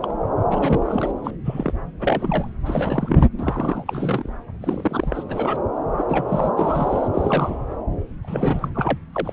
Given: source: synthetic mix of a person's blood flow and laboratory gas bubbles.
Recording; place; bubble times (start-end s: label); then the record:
Doppler ultrasound of blood flow; subclavian vein
0.01-0.20 s: bubbles
0.50-1.11 s: bubbles
1.23-1.31 s: bubbles
1.45-1.72 s: bubbles
2.00-2.50 s: bubbles
2.65-3.26 s: bubbles
3.39-4.30 s: bubbles
4.62-5.23 s: bubbles
5.29-5.62 s: bubbles
5.97-6.05 s: bubbles
6.09-6.51 s: bubbles
6.56-7.08 s: bubbles
7.13-7.55 s: bubbles
8.22-8.70 s: bubbles
8.74-8.98 s: bubbles
9.12-9.33 s: bubbles
From the record:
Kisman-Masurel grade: 242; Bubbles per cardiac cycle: several, 3 to 8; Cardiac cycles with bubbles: 100%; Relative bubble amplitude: moderate (0.250 to 0.450); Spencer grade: 3 (all of the cardiac periods contain showers or single bubble signals, but not dominating or overriding the cardiac motion signals); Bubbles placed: anywhere in the cardiac cycle